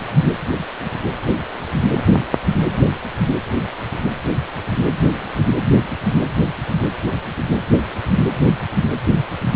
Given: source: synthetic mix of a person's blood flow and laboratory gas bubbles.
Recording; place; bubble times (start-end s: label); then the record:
Doppler ultrasound of blood flow; precordium
no bubbles
From the record:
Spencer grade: 0 (complete lack of bubble signals)